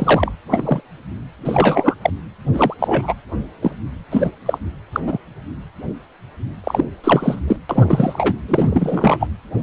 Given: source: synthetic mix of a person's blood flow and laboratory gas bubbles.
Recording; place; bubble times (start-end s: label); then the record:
Doppler ultrasound of blood flow; precordium
0.00-0.32 s: bubbles
0.51-0.80 s: bubbles
1.45-1.95 s: bubbles
2.01-2.10 s: bubbles
2.53-2.74 s: bubbles
2.79-3.13 s: bubbles
3.61-3.71 s: bubbles
4.10-4.30 s: bubbles
4.46-4.58 s: bubbles
4.92-5.00 s: bubbles
5.06-5.19 s: bubbles
6.63-6.84 s: bubbles
7.04-7.40 s: bubbles
7.47-7.56 s: bubbles
7.69-8.37 s: bubbles
8.48-9.27 s: bubbles
From the record:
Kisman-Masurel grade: 233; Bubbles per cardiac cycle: several, 3 to 8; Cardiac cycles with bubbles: 50 to 99%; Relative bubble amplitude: loud (0.450 to 0.775); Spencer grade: 3 (all of the cardiac periods contain showers or single bubble signals, but not dominating or overriding the cardiac motion signals); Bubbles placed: anywhere in the cardiac cycle